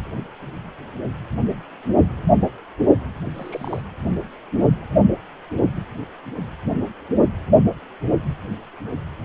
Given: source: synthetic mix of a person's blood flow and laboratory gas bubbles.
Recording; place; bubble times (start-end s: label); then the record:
Doppler ultrasound of blood flow; precordium
3.35-3.82 s: bubbles
From the record:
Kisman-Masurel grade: 111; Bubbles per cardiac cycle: 1 to 2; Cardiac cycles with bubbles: 1 to 10%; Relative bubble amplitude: barely perceptible (0.100 to 0.250); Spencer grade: 1 (occasional bubble signal discernible with the cardiac motion signal, with majority of cardiac periods free of bubbles); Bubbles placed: only in the low amplitude regions of the cardiac cycle